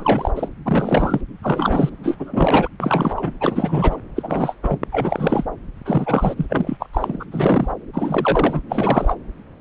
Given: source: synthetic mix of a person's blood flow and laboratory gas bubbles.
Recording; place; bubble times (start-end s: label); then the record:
Doppler ultrasound of blood flow; subclavian vein
0.00-0.31 s: bubbles
0.35-0.50 s: bubbles
0.65-1.21 s: bubbles
1.43-1.90 s: bubbles
2.03-2.16 s: bubbles
2.19-2.68 s: bubbles
2.80-3.33 s: bubbles
3.40-3.96 s: bubbles
4.16-4.55 s: bubbles
4.62-4.79 s: bubbles
4.92-5.45 s: bubbles
5.85-6.46 s: bubbles
6.50-6.77 s: bubbles
6.79-6.87 s: bubbles
6.93-7.25 s: bubbles
7.31-7.74 s: bubbles
7.93-8.60 s: bubbles
8.69-9.15 s: bubbles
From the record:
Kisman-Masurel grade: 333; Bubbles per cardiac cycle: rolling drumbeat, 9 or more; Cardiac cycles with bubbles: 50 to 99%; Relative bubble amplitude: loud (0.450 to 0.775); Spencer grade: 3 (all of the cardiac periods contain showers or single bubble signals, but not dominating or overriding the cardiac motion signals); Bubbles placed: anywhere in the cardiac cycle